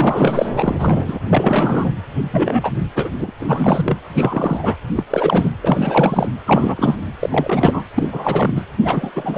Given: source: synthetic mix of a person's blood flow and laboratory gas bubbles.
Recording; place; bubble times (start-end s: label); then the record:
Doppler ultrasound of blood flow; precordium
0.00-0.49 s: bubbles
0.56-1.20 s: bubbles
1.29-1.94 s: bubbles
2.31-2.73 s: bubbles
2.95-3.31 s: bubbles
3.38-3.97 s: bubbles
4.14-4.76 s: bubbles
4.95-5.04 s: bubbles
5.10-5.50 s: bubbles
5.62-6.29 s: bubbles
6.46-6.96 s: bubbles
7.20-7.82 s: bubbles
7.95-8.08 s: bubbles
8.12-8.64 s: bubbles
8.84-9.38 s: bubbles
From the record:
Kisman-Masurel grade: 343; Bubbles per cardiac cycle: rolling drumbeat, 9 or more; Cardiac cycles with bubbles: 100%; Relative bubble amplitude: loud (0.450 to 0.775); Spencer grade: 3 (all of the cardiac periods contain showers or single bubble signals, but not dominating or overriding the cardiac motion signals); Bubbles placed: anywhere in the cardiac cycle